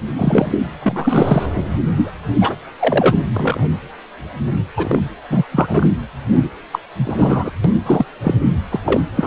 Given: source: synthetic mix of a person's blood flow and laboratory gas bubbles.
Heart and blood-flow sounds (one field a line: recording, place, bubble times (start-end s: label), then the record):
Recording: Doppler ultrasound of blood flow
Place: precordium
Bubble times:
0.17-0.52 s: bubbles
0.80-1.46 s: bubbles
1.95-2.11 s: bubbles
2.41-2.55 s: bubbles
2.79-3.17 s: bubbles
3.34-3.66 s: bubbles
4.76-5.00 s: bubbles
5.30-5.43 s: bubbles
5.51-5.93 s: bubbles
6.35-6.50 s: bubbles
6.73-6.79 s: bubbles
7.04-7.51 s: bubbles
7.64-7.70 s: bubbles
7.86-8.05 s: bubbles
8.21-8.34 s: bubbles
8.70-8.80 s: bubbles
8.86-9.01 s: bubbles
9.16-9.27 s: bubbles
From the record:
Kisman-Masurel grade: 233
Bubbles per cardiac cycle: several, 3 to 8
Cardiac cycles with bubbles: 50 to 99%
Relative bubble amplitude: loud (0.450 to 0.775)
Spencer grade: 3 (all of the cardiac periods contain showers or single bubble signals, but not dominating or overriding the cardiac motion signals)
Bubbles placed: anywhere in the cardiac cycle